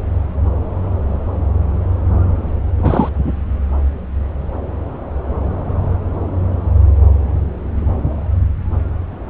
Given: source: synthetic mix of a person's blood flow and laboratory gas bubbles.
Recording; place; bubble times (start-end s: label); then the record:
Doppler ultrasound of blood flow; subclavian vein
2.78-3.09 s: bubbles
3.23-3.33 s: bubbles
From the record:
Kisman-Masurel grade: 213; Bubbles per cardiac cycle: several, 3 to 8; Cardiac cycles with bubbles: 1 to 10%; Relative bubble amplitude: loud (0.450 to 0.775); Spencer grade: 1 (occasional bubble signal discernible with the cardiac motion signal, with majority of cardiac periods free of bubbles); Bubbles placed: anywhere in the cardiac cycle